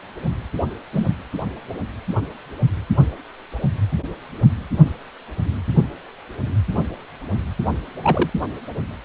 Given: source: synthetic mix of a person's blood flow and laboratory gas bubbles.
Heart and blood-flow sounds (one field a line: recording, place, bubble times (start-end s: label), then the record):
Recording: Doppler ultrasound of blood flow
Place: precordium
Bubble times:
0.93-1.06 s: bubbles
8.02-8.29 s: bubbles
From the record:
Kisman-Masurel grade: 122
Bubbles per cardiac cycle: 1 to 2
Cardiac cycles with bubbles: 10 to 50%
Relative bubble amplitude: moderate (0.250 to 0.450)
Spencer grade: 2 (many but less than half of the cardiac periods contain bubble signals, singularly or in groups)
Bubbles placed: anywhere in the cardiac cycle